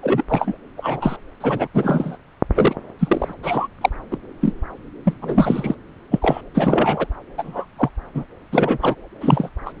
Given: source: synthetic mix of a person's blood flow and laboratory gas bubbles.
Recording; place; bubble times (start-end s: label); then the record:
Doppler ultrasound of blood flow; subclavian vein
0.02-0.23 s: bubbles
0.29-0.57 s: bubbles
0.77-1.17 s: bubbles
1.40-1.67 s: bubbles
1.73-2.17 s: bubbles
2.56-2.75 s: bubbles
2.99-3.35 s: bubbles
3.43-3.67 s: bubbles
3.81-3.90 s: bubbles
4.11-4.17 s: bubbles
4.41-4.54 s: bubbles
5.04-5.13 s: bubbles
5.21-5.75 s: bubbles
6.11-6.19 s: bubbles
6.21-6.41 s: bubbles
6.54-7.07 s: bubbles
7.38-7.67 s: bubbles
7.78-7.90 s: bubbles
8.14-8.24 s: bubbles
8.51-8.78 s: bubbles
8.81-8.95 s: bubbles
9.21-9.49 s: bubbles
9.65-9.72 s: bubbles
From the record:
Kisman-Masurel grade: 243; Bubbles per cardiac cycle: several, 3 to 8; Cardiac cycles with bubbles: 100%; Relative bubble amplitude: loud (0.450 to 0.775); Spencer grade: 3 (all of the cardiac periods contain showers or single bubble signals, but not dominating or overriding the cardiac motion signals); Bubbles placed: anywhere in the cardiac cycle